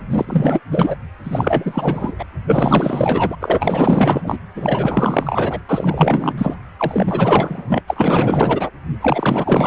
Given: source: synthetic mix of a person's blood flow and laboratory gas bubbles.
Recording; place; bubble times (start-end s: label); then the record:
Doppler ultrasound of blood flow; precordium
0.10-0.60 s: bubbles
0.71-0.96 s: bubbles
1.23-2.13 s: bubbles
2.19-2.25 s: bubbles
2.46-3.36 s: bubbles
3.40-4.37 s: bubbles
4.55-5.59 s: bubbles
5.68-6.34 s: bubbles
6.37-6.55 s: bubbles
6.79-7.82 s: bubbles
7.87-8.71 s: bubbles
9.00-9.67 s: bubbles
From the record:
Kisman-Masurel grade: 444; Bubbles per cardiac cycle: continuous sound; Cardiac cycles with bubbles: 100%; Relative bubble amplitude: maximal (0.775 to 0.999); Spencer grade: 4 (maximum detectable bubble signal sounding continuously throughout systole and diastole of every cardiac period, and overriding the amplitude of the normal cardiac signals); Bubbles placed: anywhere in the cardiac cycle